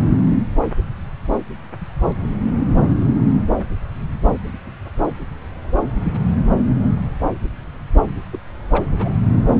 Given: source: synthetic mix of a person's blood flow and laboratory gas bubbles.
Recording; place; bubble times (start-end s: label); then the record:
Doppler ultrasound of blood flow; subclavian vein
0.30-0.44 s: bubbles
8.32-8.39 s: bubbles
8.70-8.86 s: bubbles
8.99-9.14 s: bubbles
9.49-9.53 s: bubbles
From the record:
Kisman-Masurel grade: 121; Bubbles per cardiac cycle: 1 to 2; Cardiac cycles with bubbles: 10 to 50%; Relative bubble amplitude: barely perceptible (0.100 to 0.250); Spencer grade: 2 (many but less than half of the cardiac periods contain bubble signals, singularly or in groups); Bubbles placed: anywhere in the cardiac cycle